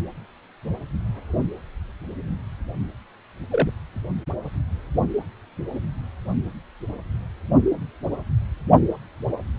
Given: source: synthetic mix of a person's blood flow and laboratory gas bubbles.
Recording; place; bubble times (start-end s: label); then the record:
Doppler ultrasound of blood flow; precordium
3.50-3.69 s: bubbles
From the record:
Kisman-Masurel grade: 111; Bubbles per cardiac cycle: 1 to 2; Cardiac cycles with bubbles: 1 to 10%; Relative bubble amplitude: barely perceptible (0.100 to 0.250); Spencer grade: 1 (occasional bubble signal discernible with the cardiac motion signal, with majority of cardiac periods free of bubbles); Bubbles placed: only in the low amplitude regions of the cardiac cycle